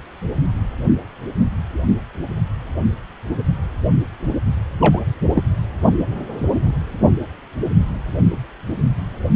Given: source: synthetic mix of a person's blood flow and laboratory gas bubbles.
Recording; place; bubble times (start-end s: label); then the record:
Doppler ultrasound of blood flow; precordium
4.80-5.00 s: bubbles
5.34-5.43 s: bubbles
From the record:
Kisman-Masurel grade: 112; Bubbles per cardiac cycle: 1 to 2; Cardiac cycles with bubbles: 1 to 10%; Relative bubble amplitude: moderate (0.250 to 0.450); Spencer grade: 1 (occasional bubble signal discernible with the cardiac motion signal, with majority of cardiac periods free of bubbles); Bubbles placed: only in the low amplitude regions of the cardiac cycle